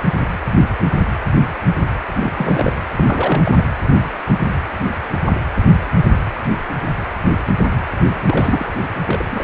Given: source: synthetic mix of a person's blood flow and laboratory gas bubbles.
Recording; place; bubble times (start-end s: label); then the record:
Doppler ultrasound of blood flow; precordium
2.19-2.71 s: bubbles
2.95-3.42 s: bubbles
3.45-3.51 s: bubbles
3.56-3.65 s: bubbles
8.27-8.66 s: bubbles
9.06-9.25 s: bubbles
9.30-9.44 s: bubbles
From the record:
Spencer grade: 2 (many but less than half of the cardiac periods contain bubble signals, singularly or in groups); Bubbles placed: anywhere in the cardiac cycle